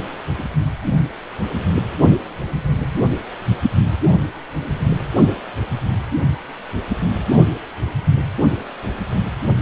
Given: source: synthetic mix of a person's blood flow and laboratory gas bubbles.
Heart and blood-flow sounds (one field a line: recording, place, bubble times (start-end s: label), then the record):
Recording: Doppler ultrasound of blood flow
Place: precordium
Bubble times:
0.38-0.42 s: bubbles
From the record:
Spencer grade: 2 (many but less than half of the cardiac periods contain bubble signals, singularly or in groups)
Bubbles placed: anywhere in the cardiac cycle